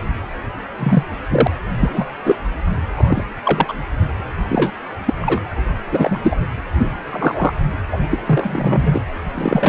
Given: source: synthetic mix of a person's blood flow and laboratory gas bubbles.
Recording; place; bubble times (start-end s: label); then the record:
Doppler ultrasound of blood flow; precordium
0.79-1.04 s: bubbles
1.30-1.47 s: bubbles
1.80-2.05 s: bubbles
2.25-2.35 s: bubbles
2.97-3.24 s: bubbles
3.45-3.74 s: bubbles
4.48-4.71 s: bubbles
5.05-5.13 s: bubbles
5.21-5.54 s: bubbles
5.92-6.36 s: bubbles
6.78-6.90 s: bubbles
7.12-7.53 s: bubbles
7.91-7.98 s: bubbles
8.10-8.20 s: bubbles
8.24-9.02 s: bubbles
9.35-9.69 s: bubbles
From the record:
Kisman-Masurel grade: 243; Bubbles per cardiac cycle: several, 3 to 8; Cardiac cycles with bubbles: 100%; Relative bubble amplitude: loud (0.450 to 0.775); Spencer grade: 3 (all of the cardiac periods contain showers or single bubble signals, but not dominating or overriding the cardiac motion signals); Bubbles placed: anywhere in the cardiac cycle